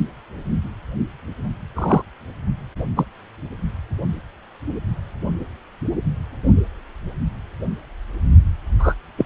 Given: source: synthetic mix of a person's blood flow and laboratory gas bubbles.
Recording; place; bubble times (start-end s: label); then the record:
Doppler ultrasound of blood flow; precordium
1.75-2.02 s: bubbles
2.96-3.06 s: bubbles
8.79-8.94 s: bubbles
9.17-9.25 s: bubbles
From the record:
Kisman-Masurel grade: 123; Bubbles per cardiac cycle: 1 to 2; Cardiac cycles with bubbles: 10 to 50%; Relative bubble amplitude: loud (0.450 to 0.775); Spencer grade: 2 (many but less than half of the cardiac periods contain bubble signals, singularly or in groups); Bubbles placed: only in the low amplitude regions of the cardiac cycle